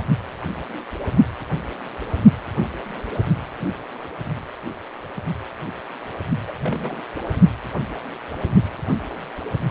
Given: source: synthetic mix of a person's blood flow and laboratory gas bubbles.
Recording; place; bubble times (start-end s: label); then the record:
Doppler ultrasound of blood flow; precordium
6.47-6.52 s: bubbles
6.60-7.00 s: bubbles
From the record:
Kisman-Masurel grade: 211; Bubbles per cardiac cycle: several, 3 to 8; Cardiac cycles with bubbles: 1 to 10%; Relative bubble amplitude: barely perceptible (0.100 to 0.250); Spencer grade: 1 (occasional bubble signal discernible with the cardiac motion signal, with majority of cardiac periods free of bubbles); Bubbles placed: only in the low amplitude regions of the cardiac cycle